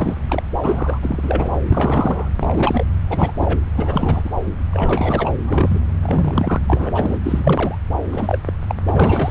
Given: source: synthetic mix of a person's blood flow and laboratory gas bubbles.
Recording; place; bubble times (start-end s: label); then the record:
Doppler ultrasound of blood flow; subclavian vein
0.00-0.16 s: bubbles
0.28-0.43 s: bubbles
0.63-0.98 s: bubbles
1.02-1.56 s: bubbles
1.69-2.33 s: bubbles
2.40-2.84 s: bubbles
3.10-3.31 s: bubbles
3.38-3.58 s: bubbles
3.75-4.30 s: bubbles
4.68-5.30 s: bubbles
5.44-5.80 s: bubbles
6.03-6.59 s: bubbles
6.67-7.17 s: bubbles
7.24-7.77 s: bubbles
8.12-8.38 s: bubbles
8.46-8.52 s: bubbles
8.68-8.74 s: bubbles
8.87-9.31 s: bubbles
From the record:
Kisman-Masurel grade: 342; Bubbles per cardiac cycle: rolling drumbeat, 9 or more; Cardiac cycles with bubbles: 100%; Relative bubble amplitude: moderate (0.250 to 0.450); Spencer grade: 3 (all of the cardiac periods contain showers or single bubble signals, but not dominating or overriding the cardiac motion signals); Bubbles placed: anywhere in the cardiac cycle